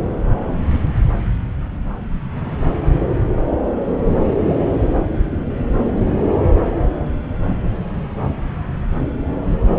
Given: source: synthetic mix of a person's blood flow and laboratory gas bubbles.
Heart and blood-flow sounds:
Doppler ultrasound of blood flow; subclavian vein
7.43-7.56 s: bubbles
From the record:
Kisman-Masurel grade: 111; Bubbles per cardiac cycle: 1 to 2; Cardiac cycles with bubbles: 1 to 10%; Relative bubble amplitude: barely perceptible (0.100 to 0.250); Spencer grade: 1 (occasional bubble signal discernible with the cardiac motion signal, with majority of cardiac periods free of bubbles); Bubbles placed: anywhere in the cardiac cycle

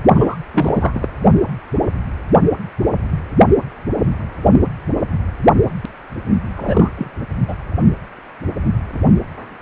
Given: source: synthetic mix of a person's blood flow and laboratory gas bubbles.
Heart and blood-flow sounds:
Doppler ultrasound of blood flow; precordium
0.14-0.36 s: bubbles
0.53-1.09 s: bubbles
6.56-6.89 s: bubbles
6.97-7.11 s: bubbles
7.48-7.54 s: bubbles
From the record:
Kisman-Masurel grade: 222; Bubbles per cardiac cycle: several, 3 to 8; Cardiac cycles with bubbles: 10 to 50%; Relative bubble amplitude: moderate (0.250 to 0.450); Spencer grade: 2 (many but less than half of the cardiac periods contain bubble signals, singularly or in groups); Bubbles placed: anywhere in the cardiac cycle

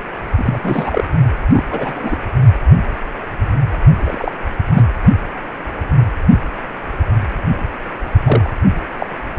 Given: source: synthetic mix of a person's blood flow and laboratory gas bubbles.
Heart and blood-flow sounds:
Doppler ultrasound of blood flow; precordium
0.38-0.59 s: bubbles
0.62-1.04 s: bubbles
1.53-1.64 s: bubbles
1.70-2.16 s: bubbles
3.93-4.34 s: bubbles
4.74-4.83 s: bubbles
8.24-8.48 s: bubbles
8.98-9.06 s: bubbles
9.36-9.39 s: bubbles
From the record:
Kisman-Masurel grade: 232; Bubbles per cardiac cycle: several, 3 to 8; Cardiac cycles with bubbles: 50 to 99%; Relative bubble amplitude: moderate (0.250 to 0.450); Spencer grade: 3 (all of the cardiac periods contain showers or single bubble signals, but not dominating or overriding the cardiac motion signals); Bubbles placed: only in the low amplitude regions of the cardiac cycle

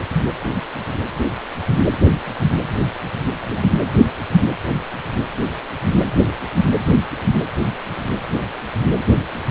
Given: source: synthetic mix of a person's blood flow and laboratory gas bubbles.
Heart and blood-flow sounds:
Doppler ultrasound of blood flow; precordium
9.46-9.51 s: bubbles
From the record:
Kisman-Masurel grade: 112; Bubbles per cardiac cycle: 1 to 2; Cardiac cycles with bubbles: 1 to 10%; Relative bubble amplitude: moderate (0.250 to 0.450); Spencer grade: 1 (occasional bubble signal discernible with the cardiac motion signal, with majority of cardiac periods free of bubbles); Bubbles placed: anywhere in the cardiac cycle

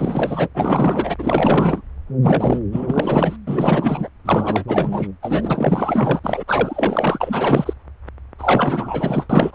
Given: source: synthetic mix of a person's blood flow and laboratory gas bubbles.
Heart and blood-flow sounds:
Doppler ultrasound of blood flow; subclavian vein
0.00-0.48 s: bubbles
0.54-1.15 s: bubbles
1.18-1.81 s: bubbles
2.22-2.61 s: bubbles
2.71-3.36 s: bubbles
3.47-4.09 s: bubbles
4.25-4.64 s: bubbles
4.67-5.08 s: bubbles
5.22-6.20 s: bubbles
6.24-6.44 s: bubbles
6.47-7.74 s: bubbles
8.38-9.27 s: bubbles
9.29-9.55 s: bubbles
From the record:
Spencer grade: 4 (maximum detectable bubble signal sounding continuously throughout systole and diastole of every cardiac period, and overriding the amplitude of the normal cardiac signals); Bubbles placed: anywhere in the cardiac cycle

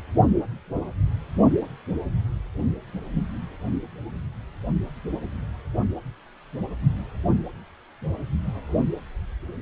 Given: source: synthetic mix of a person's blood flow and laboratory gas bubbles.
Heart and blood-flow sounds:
Doppler ultrasound of blood flow; precordium
no bubbles
From the record:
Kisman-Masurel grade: 000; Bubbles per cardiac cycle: 0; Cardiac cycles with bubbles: 0%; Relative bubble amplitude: no bubbles discernible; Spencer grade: 0 (complete lack of bubble signals)

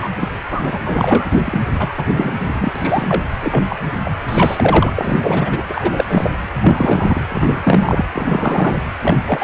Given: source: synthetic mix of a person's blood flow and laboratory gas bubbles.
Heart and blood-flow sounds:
Doppler ultrasound of blood flow; precordium
0.00-0.09 s: bubbles
0.16-0.28 s: bubbles
0.50-0.61 s: bubbles
0.65-0.80 s: bubbles
0.84-1.62 s: bubbles
1.79-1.92 s: bubbles
1.97-2.04 s: bubbles
2.08-3.23 s: bubbles
3.40-3.65 s: bubbles
3.69-3.76 s: bubbles
4.04-4.16 s: bubbles
4.26-5.63 s: bubbles
5.69-6.04 s: bubbles
6.08-6.30 s: bubbles
6.62-7.21 s: bubbles
7.30-8.05 s: bubbles
8.13-8.78 s: bubbles
9.01-9.17 s: bubbles
9.25-9.43 s: bubbles
From the record:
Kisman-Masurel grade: 243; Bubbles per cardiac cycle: several, 3 to 8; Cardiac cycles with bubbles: 100%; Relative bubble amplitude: loud (0.450 to 0.775); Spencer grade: 3 (all of the cardiac periods contain showers or single bubble signals, but not dominating or overriding the cardiac motion signals); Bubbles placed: anywhere in the cardiac cycle

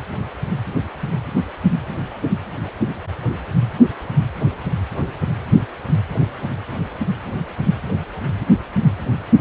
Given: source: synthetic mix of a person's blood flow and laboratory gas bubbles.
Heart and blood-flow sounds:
Doppler ultrasound of blood flow; precordium
no bubbles
From the record:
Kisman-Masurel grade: 000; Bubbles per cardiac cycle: 0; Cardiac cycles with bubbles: 0%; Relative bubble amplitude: no bubbles discernible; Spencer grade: 0 (complete lack of bubble signals)

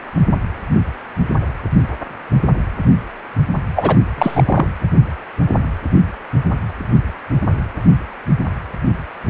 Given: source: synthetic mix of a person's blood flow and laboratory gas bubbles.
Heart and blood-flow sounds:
Doppler ultrasound of blood flow; precordium
3.76-3.97 s: bubbles
4.18-4.66 s: bubbles
From the record:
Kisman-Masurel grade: 213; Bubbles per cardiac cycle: several, 3 to 8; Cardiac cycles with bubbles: 1 to 10%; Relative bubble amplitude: loud (0.450 to 0.775); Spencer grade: 1 (occasional bubble signal discernible with the cardiac motion signal, with majority of cardiac periods free of bubbles); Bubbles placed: anywhere in the cardiac cycle

